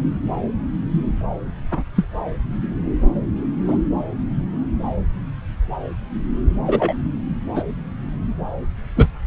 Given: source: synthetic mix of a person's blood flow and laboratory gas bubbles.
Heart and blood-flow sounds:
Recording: Doppler ultrasound of blood flow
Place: subclavian vein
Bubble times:
1.71-1.83 s: bubbles
1.96-2.05 s: bubbles
3.68-3.77 s: bubbles
6.66-6.94 s: bubbles
7.56-7.64 s: bubbles
8.96-9.07 s: bubbles
From the record:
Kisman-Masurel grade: 123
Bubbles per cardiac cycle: 1 to 2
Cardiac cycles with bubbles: 10 to 50%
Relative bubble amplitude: loud (0.450 to 0.775)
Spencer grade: 2 (many but less than half of the cardiac periods contain bubble signals, singularly or in groups)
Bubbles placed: anywhere in the cardiac cycle

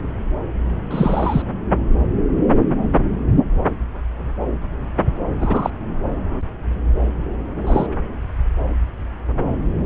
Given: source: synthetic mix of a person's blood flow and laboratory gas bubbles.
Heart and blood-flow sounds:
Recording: Doppler ultrasound of blood flow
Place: subclavian vein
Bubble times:
0.90-1.42 s: bubbles
5.40-5.70 s: bubbles
7.67-7.86 s: bubbles
From the record:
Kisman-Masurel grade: 123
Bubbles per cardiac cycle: 1 to 2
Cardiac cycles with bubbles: 10 to 50%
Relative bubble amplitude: loud (0.450 to 0.775)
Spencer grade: 2 (many but less than half of the cardiac periods contain bubble signals, singularly or in groups)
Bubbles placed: anywhere in the cardiac cycle

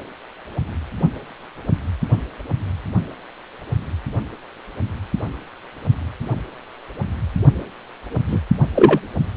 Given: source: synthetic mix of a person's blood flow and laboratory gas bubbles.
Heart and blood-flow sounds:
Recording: Doppler ultrasound of blood flow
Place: precordium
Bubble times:
8.27-8.40 s: bubbles
8.75-8.99 s: bubbles
From the record:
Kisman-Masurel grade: 123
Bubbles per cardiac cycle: 1 to 2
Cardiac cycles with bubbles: 10 to 50%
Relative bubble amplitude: loud (0.450 to 0.775)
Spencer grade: 2 (many but less than half of the cardiac periods contain bubble signals, singularly or in groups)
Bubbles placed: only in the low amplitude regions of the cardiac cycle

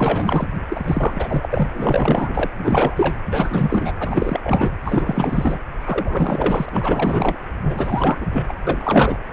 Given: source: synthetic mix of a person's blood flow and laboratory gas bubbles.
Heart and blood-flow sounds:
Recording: Doppler ultrasound of blood flow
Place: precordium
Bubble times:
0.00-0.47 s: bubbles
0.68-1.70 s: bubbles
1.73-2.50 s: bubbles
2.58-3.16 s: bubbles
3.26-3.92 s: bubbles
4.00-4.71 s: bubbles
4.84-5.59 s: bubbles
5.79-6.69 s: bubbles
6.71-7.38 s: bubbles
7.63-8.27 s: bubbles
8.32-8.46 s: bubbles
8.48-8.54 s: bubbles
8.67-9.19 s: bubbles
From the record:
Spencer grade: 4 (maximum detectable bubble signal sounding continuously throughout systole and diastole of every cardiac period, and overriding the amplitude of the normal cardiac signals)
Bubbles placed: anywhere in the cardiac cycle

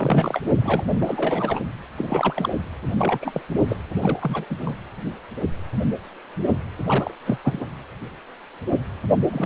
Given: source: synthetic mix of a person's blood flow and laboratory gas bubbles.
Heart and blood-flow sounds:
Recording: Doppler ultrasound of blood flow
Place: precordium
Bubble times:
0.00-0.41 s: bubbles
0.44-0.81 s: bubbles
0.93-1.60 s: bubbles
1.97-2.53 s: bubbles
2.98-3.42 s: bubbles
3.68-3.76 s: bubbles
3.96-4.46 s: bubbles
4.49-4.76 s: bubbles
6.86-7.14 s: bubbles
7.25-7.37 s: bubbles
7.43-7.66 s: bubbles
9.30-9.46 s: bubbles
From the record:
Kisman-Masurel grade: 332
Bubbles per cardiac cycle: rolling drumbeat, 9 or more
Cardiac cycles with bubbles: 50 to 99%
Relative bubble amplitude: moderate (0.250 to 0.450)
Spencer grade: 3 (all of the cardiac periods contain showers or single bubble signals, but not dominating or overriding the cardiac motion signals)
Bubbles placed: anywhere in the cardiac cycle

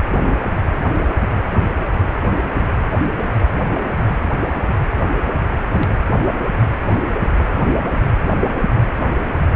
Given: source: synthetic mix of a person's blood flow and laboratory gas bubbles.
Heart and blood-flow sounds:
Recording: Doppler ultrasound of blood flow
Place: precordium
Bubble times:
no bubbles
From the record:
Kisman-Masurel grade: 000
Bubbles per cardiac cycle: 0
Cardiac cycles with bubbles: 0%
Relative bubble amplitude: no bubbles discernible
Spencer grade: 0 (complete lack of bubble signals)

